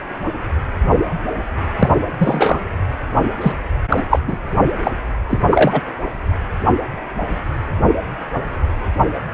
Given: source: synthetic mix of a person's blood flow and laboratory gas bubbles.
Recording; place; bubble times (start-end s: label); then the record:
Doppler ultrasound of blood flow; precordium
1.79-1.89 s: bubbles
2.18-2.60 s: bubbles
3.41-3.52 s: bubbles
3.90-4.04 s: bubbles
4.10-4.19 s: bubbles
4.28-4.38 s: bubbles
4.83-4.91 s: bubbles
5.29-5.42 s: bubbles
5.50-5.82 s: bubbles
From the record:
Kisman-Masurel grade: 223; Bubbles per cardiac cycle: several, 3 to 8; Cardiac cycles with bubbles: 10 to 50%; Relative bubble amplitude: loud (0.450 to 0.775); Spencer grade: 2 (many but less than half of the cardiac periods contain bubble signals, singularly or in groups); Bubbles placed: anywhere in the cardiac cycle